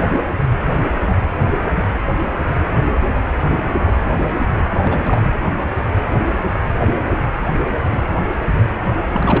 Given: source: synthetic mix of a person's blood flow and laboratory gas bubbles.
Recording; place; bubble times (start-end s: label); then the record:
Doppler ultrasound of blood flow; precordium
4.80-5.29 s: bubbles
9.11-9.40 s: bubbles
From the record:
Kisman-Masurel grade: 213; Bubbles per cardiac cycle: several, 3 to 8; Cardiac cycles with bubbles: 1 to 10%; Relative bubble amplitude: loud (0.450 to 0.775); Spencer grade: 1 (occasional bubble signal discernible with the cardiac motion signal, with majority of cardiac periods free of bubbles); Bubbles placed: anywhere in the cardiac cycle